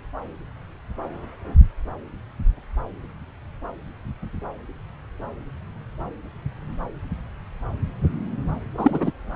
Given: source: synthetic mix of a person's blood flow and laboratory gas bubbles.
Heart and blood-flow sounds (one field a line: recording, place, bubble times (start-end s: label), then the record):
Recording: Doppler ultrasound of blood flow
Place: subclavian vein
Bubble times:
8.77-9.12 s: bubbles
From the record:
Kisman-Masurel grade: 213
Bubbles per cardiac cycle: several, 3 to 8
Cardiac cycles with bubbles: 1 to 10%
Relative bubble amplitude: loud (0.450 to 0.775)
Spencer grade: 1 (occasional bubble signal discernible with the cardiac motion signal, with majority of cardiac periods free of bubbles)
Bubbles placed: anywhere in the cardiac cycle